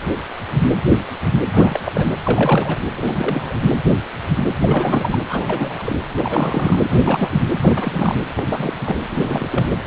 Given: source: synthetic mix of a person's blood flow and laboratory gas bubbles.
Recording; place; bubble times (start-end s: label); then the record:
Doppler ultrasound of blood flow; precordium
1.53-1.79 s: bubbles
1.85-2.12 s: bubbles
2.22-2.77 s: bubbles
2.96-3.55 s: bubbles
4.62-5.18 s: bubbles
5.29-5.99 s: bubbles
6.17-6.80 s: bubbles
6.88-7.29 s: bubbles
7.60-8.16 s: bubbles
8.35-8.73 s: bubbles
8.81-8.96 s: bubbles
9.10-9.47 s: bubbles
9.50-9.66 s: bubbles
From the record:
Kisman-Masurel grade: 332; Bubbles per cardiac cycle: rolling drumbeat, 9 or more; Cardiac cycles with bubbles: 50 to 99%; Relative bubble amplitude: moderate (0.250 to 0.450); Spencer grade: 3 (all of the cardiac periods contain showers or single bubble signals, but not dominating or overriding the cardiac motion signals); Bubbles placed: anywhere in the cardiac cycle